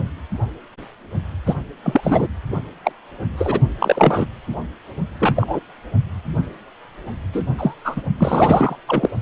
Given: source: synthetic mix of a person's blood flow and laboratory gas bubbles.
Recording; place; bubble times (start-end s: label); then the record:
Doppler ultrasound of blood flow; precordium
1.46-1.54 s: bubbles
1.83-2.27 s: bubbles
2.84-2.92 s: bubbles
3.38-3.60 s: bubbles
3.79-4.26 s: bubbles
5.19-5.59 s: bubbles
7.33-7.45 s: bubbles
7.58-7.75 s: bubbles
7.84-8.02 s: bubbles
8.18-8.75 s: bubbles
8.87-9.08 s: bubbles
From the record:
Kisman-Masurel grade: 233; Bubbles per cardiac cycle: several, 3 to 8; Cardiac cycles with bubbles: 50 to 99%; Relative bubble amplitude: loud (0.450 to 0.775); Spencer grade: 3 (all of the cardiac periods contain showers or single bubble signals, but not dominating or overriding the cardiac motion signals); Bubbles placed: only in the low amplitude regions of the cardiac cycle